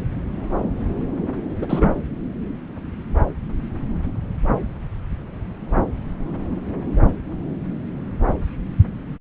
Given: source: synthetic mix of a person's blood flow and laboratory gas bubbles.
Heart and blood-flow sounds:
Doppler ultrasound of blood flow; subclavian vein
1.61-1.67 s: bubbles
1.69-1.90 s: bubbles
From the record:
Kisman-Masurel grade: 213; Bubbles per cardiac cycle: several, 3 to 8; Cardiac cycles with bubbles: 1 to 10%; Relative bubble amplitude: loud (0.450 to 0.775); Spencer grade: 1 (occasional bubble signal discernible with the cardiac motion signal, with majority of cardiac periods free of bubbles); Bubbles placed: anywhere in the cardiac cycle

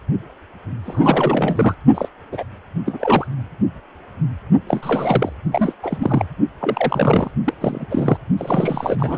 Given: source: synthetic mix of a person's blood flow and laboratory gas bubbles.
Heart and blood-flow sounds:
Doppler ultrasound of blood flow; precordium
0.83-1.75 s: bubbles
1.94-2.08 s: bubbles
2.32-2.43 s: bubbles
2.85-3.27 s: bubbles
4.67-5.33 s: bubbles
5.52-5.75 s: bubbles
5.83-6.25 s: bubbles
6.61-7.31 s: bubbles
7.45-7.54 s: bubbles
7.61-7.87 s: bubbles
7.90-8.17 s: bubbles
8.38-9.18 s: bubbles
From the record:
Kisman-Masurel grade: 332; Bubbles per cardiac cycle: rolling drumbeat, 9 or more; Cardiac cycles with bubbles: 50 to 99%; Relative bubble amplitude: moderate (0.250 to 0.450); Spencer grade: 3 (all of the cardiac periods contain showers or single bubble signals, but not dominating or overriding the cardiac motion signals); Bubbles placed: only in the low amplitude regions of the cardiac cycle

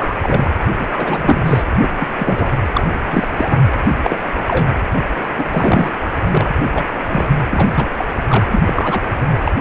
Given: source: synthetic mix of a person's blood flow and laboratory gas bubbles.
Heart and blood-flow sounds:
Doppler ultrasound of blood flow; precordium
0.00-0.16 s: bubbles
0.22-0.52 s: bubbles
0.79-0.87 s: bubbles
0.93-1.63 s: bubbles
1.80-1.93 s: bubbles
1.99-2.10 s: bubbles
2.18-2.49 s: bubbles
2.74-2.85 s: bubbles
3.11-3.28 s: bubbles
3.36-3.59 s: bubbles
4.03-4.34 s: bubbles
4.47-4.69 s: bubbles
5.22-5.29 s: bubbles
5.38-5.44 s: bubbles
5.52-5.91 s: bubbles
6.31-6.52 s: bubbles
6.75-6.85 s: bubbles
7.12-7.26 s: bubbles
7.50-7.67 s: bubbles
7.73-7.86 s: bubbles
7.97-8.05 s: bubbles
8.28-8.46 s: bubbles
8.50-8.61 s: bubbles
8.66-9.00 s: bubbles
9.45-9.52 s: bubbles
From the record:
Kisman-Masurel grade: 243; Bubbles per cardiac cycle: several, 3 to 8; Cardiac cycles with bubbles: 100%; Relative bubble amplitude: loud (0.450 to 0.775); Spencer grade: 3 (all of the cardiac periods contain showers or single bubble signals, but not dominating or overriding the cardiac motion signals); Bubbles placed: anywhere in the cardiac cycle

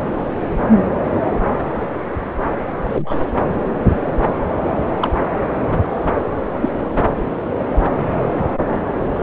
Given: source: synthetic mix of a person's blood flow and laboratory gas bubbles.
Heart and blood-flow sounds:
Doppler ultrasound of blood flow; subclavian vein
2.83-3.15 s: bubbles
4.78-4.84 s: bubbles
5.00-5.12 s: bubbles
6.61-6.69 s: bubbles
From the record:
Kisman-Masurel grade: 122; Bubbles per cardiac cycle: 1 to 2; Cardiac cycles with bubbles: 10 to 50%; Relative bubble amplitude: moderate (0.250 to 0.450); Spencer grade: 2 (many but less than half of the cardiac periods contain bubble signals, singularly or in groups); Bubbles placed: anywhere in the cardiac cycle

